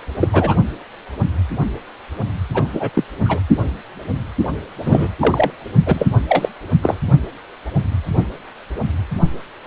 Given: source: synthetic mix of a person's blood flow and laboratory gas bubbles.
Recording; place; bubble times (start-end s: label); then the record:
Doppler ultrasound of blood flow; precordium
0.20-0.29 s: bubbles
0.32-0.56 s: bubbles
2.53-2.67 s: bubbles
2.73-2.90 s: bubbles
2.94-3.04 s: bubbles
3.25-3.40 s: bubbles
4.84-5.08 s: bubbles
5.20-5.51 s: bubbles
5.86-6.09 s: bubbles
6.28-6.49 s: bubbles
6.83-6.97 s: bubbles
From the record:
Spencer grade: 2 (many but less than half of the cardiac periods contain bubble signals, singularly or in groups); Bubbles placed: only in the low amplitude regions of the cardiac cycle